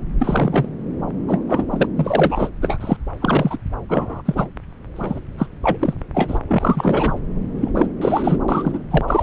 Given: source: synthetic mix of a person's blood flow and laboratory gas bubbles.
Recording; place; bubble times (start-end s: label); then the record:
Doppler ultrasound of blood flow; subclavian vein
0.19-0.68 s: bubbles
1.28-1.42 s: bubbles
1.48-1.64 s: bubbles
1.72-1.87 s: bubbles
1.96-2.50 s: bubbles
2.62-2.97 s: bubbles
3.21-3.57 s: bubbles
3.89-4.22 s: bubbles
4.25-4.48 s: bubbles
4.95-5.19 s: bubbles
5.38-5.46 s: bubbles
5.63-5.94 s: bubbles
6.14-6.38 s: bubbles
6.47-7.19 s: bubbles
7.61-7.71 s: bubbles
7.74-7.87 s: bubbles
8.01-8.39 s: bubbles
8.48-8.79 s: bubbles
8.91-9.23 s: bubbles
From the record:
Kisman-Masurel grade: 242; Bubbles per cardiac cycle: several, 3 to 8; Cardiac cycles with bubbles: 100%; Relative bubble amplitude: moderate (0.250 to 0.450); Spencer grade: 3 (all of the cardiac periods contain showers or single bubble signals, but not dominating or overriding the cardiac motion signals); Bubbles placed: anywhere in the cardiac cycle